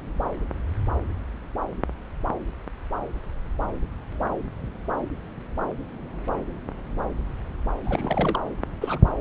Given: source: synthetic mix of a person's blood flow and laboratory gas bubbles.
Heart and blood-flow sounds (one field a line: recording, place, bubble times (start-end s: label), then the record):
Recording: Doppler ultrasound of blood flow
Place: subclavian vein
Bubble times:
7.83-8.39 s: bubbles
8.80-8.98 s: bubbles
From the record:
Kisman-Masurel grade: 221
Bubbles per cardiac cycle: several, 3 to 8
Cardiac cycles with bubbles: 10 to 50%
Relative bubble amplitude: barely perceptible (0.100 to 0.250)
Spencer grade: 2 (many but less than half of the cardiac periods contain bubble signals, singularly or in groups)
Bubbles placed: anywhere in the cardiac cycle